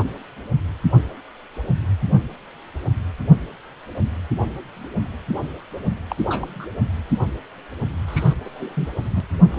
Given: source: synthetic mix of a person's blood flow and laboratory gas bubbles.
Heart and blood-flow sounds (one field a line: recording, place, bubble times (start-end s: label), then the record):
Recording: Doppler ultrasound of blood flow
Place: precordium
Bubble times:
6.10-6.16 s: bubbles
6.25-6.65 s: bubbles
8.07-8.35 s: bubbles
8.44-8.88 s: bubbles
9.10-9.21 s: bubbles
9.43-9.47 s: bubbles
9.50-9.59 s: bubbles
From the record:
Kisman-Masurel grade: 221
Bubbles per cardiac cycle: several, 3 to 8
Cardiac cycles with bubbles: 10 to 50%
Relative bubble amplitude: barely perceptible (0.100 to 0.250)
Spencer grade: 2 (many but less than half of the cardiac periods contain bubble signals, singularly or in groups)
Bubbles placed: anywhere in the cardiac cycle